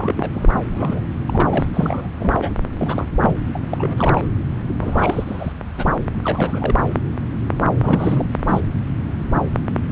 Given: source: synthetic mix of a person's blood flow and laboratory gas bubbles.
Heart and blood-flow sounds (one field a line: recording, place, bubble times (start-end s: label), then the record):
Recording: Doppler ultrasound of blood flow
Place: subclavian vein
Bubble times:
0.00-0.31 s: bubbles
0.34-0.49 s: bubbles
0.75-1.02 s: bubbles
1.26-1.65 s: bubbles
1.74-2.09 s: bubbles
2.19-2.50 s: bubbles
2.78-3.06 s: bubbles
3.22-3.36 s: bubbles
3.55-3.59 s: bubbles
3.70-4.27 s: bubbles
4.80-5.52 s: bubbles
5.77-6.09 s: bubbles
6.24-6.75 s: bubbles
7.81-8.26 s: bubbles
8.47-8.61 s: bubbles
From the record:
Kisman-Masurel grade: 332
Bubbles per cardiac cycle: rolling drumbeat, 9 or more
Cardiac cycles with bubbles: 50 to 99%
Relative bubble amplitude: moderate (0.250 to 0.450)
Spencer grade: 3 (all of the cardiac periods contain showers or single bubble signals, but not dominating or overriding the cardiac motion signals)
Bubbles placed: anywhere in the cardiac cycle